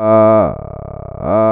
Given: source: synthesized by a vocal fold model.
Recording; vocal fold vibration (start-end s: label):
sustained vowel that changes in the middle
0.00-0.37 s: 109.6 Hz, open quotient 0.34
0.57-1.17 s: 34.0 Hz, open quotient 0.24
1.37-1.52 s: 109.6 Hz, open quotient 0.34